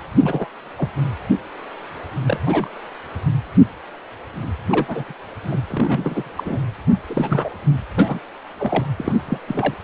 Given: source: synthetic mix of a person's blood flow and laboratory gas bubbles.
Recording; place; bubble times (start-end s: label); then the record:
Doppler ultrasound of blood flow; precordium
0.18-0.49 s: bubbles
0.78-0.89 s: bubbles
2.24-2.40 s: bubbles
2.45-2.78 s: bubbles
4.70-5.13 s: bubbles
5.43-5.60 s: bubbles
5.67-6.32 s: bubbles
6.37-6.59 s: bubbles
7.07-7.49 s: bubbles
7.96-8.20 s: bubbles
8.57-8.86 s: bubbles
8.98-9.17 s: bubbles
9.29-9.38 s: bubbles
9.47-9.74 s: bubbles
From the record:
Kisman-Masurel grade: 232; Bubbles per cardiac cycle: several, 3 to 8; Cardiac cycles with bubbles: 50 to 99%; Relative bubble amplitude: moderate (0.250 to 0.450); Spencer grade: 3 (all of the cardiac periods contain showers or single bubble signals, but not dominating or overriding the cardiac motion signals); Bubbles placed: anywhere in the cardiac cycle